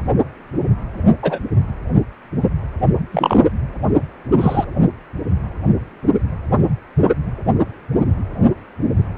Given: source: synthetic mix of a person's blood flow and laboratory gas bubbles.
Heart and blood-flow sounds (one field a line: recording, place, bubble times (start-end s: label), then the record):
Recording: Doppler ultrasound of blood flow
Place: precordium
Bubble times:
1.23-1.39 s: bubbles
3.12-3.45 s: bubbles
4.41-4.65 s: bubbles
From the record:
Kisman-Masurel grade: 123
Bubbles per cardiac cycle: 1 to 2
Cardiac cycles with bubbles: 10 to 50%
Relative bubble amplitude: loud (0.450 to 0.775)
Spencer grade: 2 (many but less than half of the cardiac periods contain bubble signals, singularly or in groups)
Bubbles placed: only in the low amplitude regions of the cardiac cycle